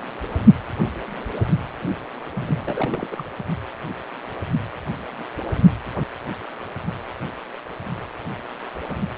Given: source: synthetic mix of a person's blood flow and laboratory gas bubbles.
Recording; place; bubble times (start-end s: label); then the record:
Doppler ultrasound of blood flow; precordium
2.33-3.25 s: bubbles
From the record:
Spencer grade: 1 (occasional bubble signal discernible with the cardiac motion signal, with majority of cardiac periods free of bubbles); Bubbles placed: only in the low amplitude regions of the cardiac cycle